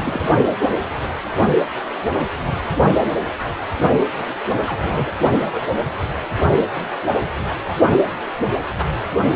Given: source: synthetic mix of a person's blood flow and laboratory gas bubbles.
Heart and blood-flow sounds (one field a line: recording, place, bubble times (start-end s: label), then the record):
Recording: Doppler ultrasound of blood flow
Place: precordium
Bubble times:
0.00-0.29 s: bubbles
0.60-0.69 s: bubbles
4.66-5.20 s: bubbles
5.52-5.62 s: bubbles
From the record:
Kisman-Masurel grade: 121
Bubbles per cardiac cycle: 1 to 2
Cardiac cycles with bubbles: 10 to 50%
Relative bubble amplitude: barely perceptible (0.100 to 0.250)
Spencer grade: 2 (many but less than half of the cardiac periods contain bubble signals, singularly or in groups)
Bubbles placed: only in the low amplitude regions of the cardiac cycle